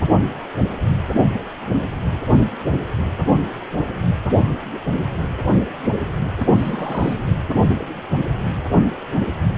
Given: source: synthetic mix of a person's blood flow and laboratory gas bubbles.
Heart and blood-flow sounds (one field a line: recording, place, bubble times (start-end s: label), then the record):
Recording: Doppler ultrasound of blood flow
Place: precordium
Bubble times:
6.40-6.46 s: bubbles
6.55-7.27 s: bubbles
From the record:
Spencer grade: 1 (occasional bubble signal discernible with the cardiac motion signal, with majority of cardiac periods free of bubbles)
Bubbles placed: anywhere in the cardiac cycle